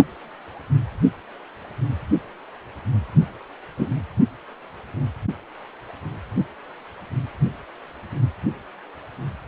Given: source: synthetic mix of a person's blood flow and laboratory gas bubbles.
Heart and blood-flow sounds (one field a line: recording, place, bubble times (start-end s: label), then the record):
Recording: Doppler ultrasound of blood flow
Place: precordium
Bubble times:
3.78-3.86 s: bubbles
From the record:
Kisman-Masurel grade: 113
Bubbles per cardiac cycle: 1 to 2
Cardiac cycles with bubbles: 1 to 10%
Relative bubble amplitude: loud (0.450 to 0.775)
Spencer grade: 1 (occasional bubble signal discernible with the cardiac motion signal, with majority of cardiac periods free of bubbles)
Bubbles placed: only in the low amplitude regions of the cardiac cycle